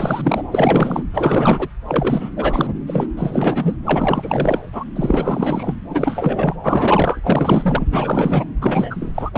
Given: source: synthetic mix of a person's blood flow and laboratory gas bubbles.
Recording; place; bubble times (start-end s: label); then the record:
Doppler ultrasound of blood flow; subclavian vein
0.00-0.43 s: bubbles
0.51-1.03 s: bubbles
1.13-1.68 s: bubbles
1.88-2.31 s: bubbles
2.36-2.74 s: bubbles
2.87-3.08 s: bubbles
3.17-3.76 s: bubbles
3.85-4.60 s: bubbles
4.72-4.83 s: bubbles
4.95-5.75 s: bubbles
5.90-6.55 s: bubbles
6.62-7.85 s: bubbles
7.91-8.46 s: bubbles
8.61-9.12 s: bubbles
9.14-9.29 s: bubbles
9.36-9.38 s: bubbles
From the record:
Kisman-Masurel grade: 444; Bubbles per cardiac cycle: continuous sound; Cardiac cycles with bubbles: 100%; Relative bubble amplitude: maximal (0.775 to 0.999); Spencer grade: 4 (maximum detectable bubble signal sounding continuously throughout systole and diastole of every cardiac period, and overriding the amplitude of the normal cardiac signals); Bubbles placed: anywhere in the cardiac cycle